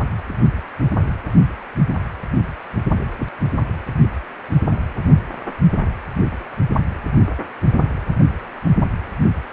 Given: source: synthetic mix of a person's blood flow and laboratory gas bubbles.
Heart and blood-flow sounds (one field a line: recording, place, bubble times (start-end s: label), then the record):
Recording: Doppler ultrasound of blood flow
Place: precordium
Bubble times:
4.66-4.79 s: bubbles
From the record:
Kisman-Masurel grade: 111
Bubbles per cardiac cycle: 1 to 2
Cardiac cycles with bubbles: 1 to 10%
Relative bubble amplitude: barely perceptible (0.100 to 0.250)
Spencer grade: 1 (occasional bubble signal discernible with the cardiac motion signal, with majority of cardiac periods free of bubbles)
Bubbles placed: only in the low amplitude regions of the cardiac cycle